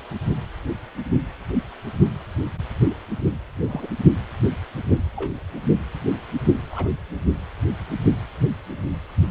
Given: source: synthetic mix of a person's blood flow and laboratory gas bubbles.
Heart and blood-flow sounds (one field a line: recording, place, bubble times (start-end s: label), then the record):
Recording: Doppler ultrasound of blood flow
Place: precordium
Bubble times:
3.67-3.87 s: bubbles
5.16-5.33 s: bubbles
6.71-6.88 s: bubbles
From the record:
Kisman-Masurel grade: 122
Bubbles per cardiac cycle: 1 to 2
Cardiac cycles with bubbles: 10 to 50%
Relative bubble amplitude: moderate (0.250 to 0.450)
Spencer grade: 2 (many but less than half of the cardiac periods contain bubble signals, singularly or in groups)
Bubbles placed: anywhere in the cardiac cycle